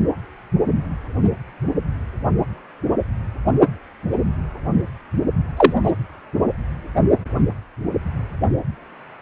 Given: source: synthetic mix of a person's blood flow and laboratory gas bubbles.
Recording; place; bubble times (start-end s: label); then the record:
Doppler ultrasound of blood flow; precordium
5.56-5.73 s: bubbles
5.83-5.91 s: bubbles
From the record:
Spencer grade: 2 (many but less than half of the cardiac periods contain bubble signals, singularly or in groups); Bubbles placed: only in the low amplitude regions of the cardiac cycle